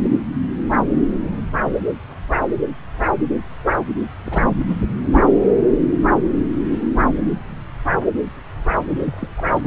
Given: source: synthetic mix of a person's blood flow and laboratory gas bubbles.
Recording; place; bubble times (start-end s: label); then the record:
Doppler ultrasound of blood flow; subclavian vein
4.23-4.54 s: bubbles
4.61-4.66 s: bubbles
5.12-5.23 s: bubbles
8.91-9.28 s: bubbles
9.38-9.41 s: bubbles
9.55-9.60 s: bubbles
From the record:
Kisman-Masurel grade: 221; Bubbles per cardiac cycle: several, 3 to 8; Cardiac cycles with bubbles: 10 to 50%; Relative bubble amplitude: barely perceptible (0.100 to 0.250); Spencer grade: 2 (many but less than half of the cardiac periods contain bubble signals, singularly or in groups); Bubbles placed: anywhere in the cardiac cycle